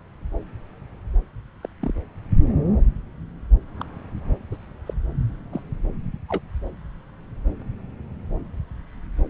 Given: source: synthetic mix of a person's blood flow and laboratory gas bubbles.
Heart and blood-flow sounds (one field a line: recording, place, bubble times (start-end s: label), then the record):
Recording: Doppler ultrasound of blood flow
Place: subclavian vein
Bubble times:
1.61-1.67 s: bubbles
1.82-1.93 s: bubbles
3.81-3.85 s: bubbles
4.52-4.57 s: bubbles
4.86-4.94 s: bubbles
5.52-5.62 s: bubbles
6.29-6.42 s: bubbles
From the record:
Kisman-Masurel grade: 121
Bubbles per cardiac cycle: 1 to 2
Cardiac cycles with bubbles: 10 to 50%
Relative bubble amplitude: barely perceptible (0.100 to 0.250)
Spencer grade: 2 (many but less than half of the cardiac periods contain bubble signals, singularly or in groups)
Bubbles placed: anywhere in the cardiac cycle